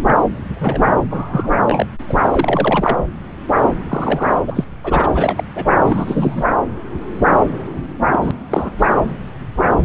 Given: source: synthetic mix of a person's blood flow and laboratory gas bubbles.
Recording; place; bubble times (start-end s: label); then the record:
Doppler ultrasound of blood flow; subclavian vein
0.05-0.16 s: bubbles
0.55-0.81 s: bubbles
1.10-1.51 s: bubbles
1.66-1.88 s: bubbles
2.08-2.14 s: bubbles
2.31-2.97 s: bubbles
3.88-4.39 s: bubbles
4.46-4.64 s: bubbles
4.83-5.09 s: bubbles
5.14-5.43 s: bubbles
5.55-5.66 s: bubbles
5.84-6.44 s: bubbles
8.12-8.31 s: bubbles
8.50-8.87 s: bubbles
From the record:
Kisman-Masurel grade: 232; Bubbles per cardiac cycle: several, 3 to 8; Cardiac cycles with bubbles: 50 to 99%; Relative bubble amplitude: moderate (0.250 to 0.450); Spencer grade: 3 (all of the cardiac periods contain showers or single bubble signals, but not dominating or overriding the cardiac motion signals); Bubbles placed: anywhere in the cardiac cycle